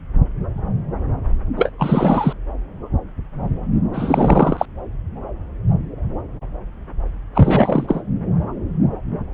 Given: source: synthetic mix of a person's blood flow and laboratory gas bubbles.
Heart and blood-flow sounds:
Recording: Doppler ultrasound of blood flow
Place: subclavian vein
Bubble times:
1.56-1.73 s: bubbles
1.78-2.33 s: bubbles
3.93-4.65 s: bubbles
7.34-8.02 s: bubbles
From the record:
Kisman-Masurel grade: 223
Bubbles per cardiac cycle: several, 3 to 8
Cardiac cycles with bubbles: 10 to 50%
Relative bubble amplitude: loud (0.450 to 0.775)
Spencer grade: 2 (many but less than half of the cardiac periods contain bubble signals, singularly or in groups)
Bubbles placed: anywhere in the cardiac cycle

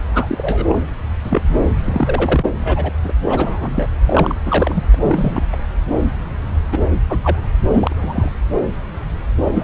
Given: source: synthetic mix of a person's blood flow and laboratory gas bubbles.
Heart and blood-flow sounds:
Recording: Doppler ultrasound of blood flow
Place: subclavian vein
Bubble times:
0.13-0.80 s: bubbles
1.23-1.42 s: bubbles
1.84-2.45 s: bubbles
2.58-2.92 s: bubbles
3.04-3.12 s: bubbles
3.27-3.87 s: bubbles
4.06-4.35 s: bubbles
4.46-4.84 s: bubbles
4.93-4.95 s: bubbles
5.02-5.42 s: bubbles
5.52-5.56 s: bubbles
6.71-6.79 s: bubbles
7.09-7.18 s: bubbles
7.22-7.46 s: bubbles
7.73-8.31 s: bubbles
9.54-9.64 s: bubbles
From the record:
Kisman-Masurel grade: 232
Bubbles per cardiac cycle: several, 3 to 8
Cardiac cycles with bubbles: 50 to 99%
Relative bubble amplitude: moderate (0.250 to 0.450)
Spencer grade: 3 (all of the cardiac periods contain showers or single bubble signals, but not dominating or overriding the cardiac motion signals)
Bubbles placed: anywhere in the cardiac cycle

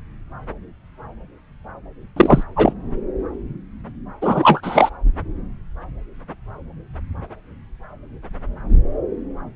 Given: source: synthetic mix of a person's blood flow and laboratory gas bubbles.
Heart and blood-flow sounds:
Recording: Doppler ultrasound of blood flow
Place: subclavian vein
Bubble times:
2.16-2.44 s: bubbles
2.56-2.73 s: bubbles
4.21-4.90 s: bubbles
From the record:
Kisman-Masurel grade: 223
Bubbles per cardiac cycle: several, 3 to 8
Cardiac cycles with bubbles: 10 to 50%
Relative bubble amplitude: loud (0.450 to 0.775)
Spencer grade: 2 (many but less than half of the cardiac periods contain bubble signals, singularly or in groups)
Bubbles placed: anywhere in the cardiac cycle

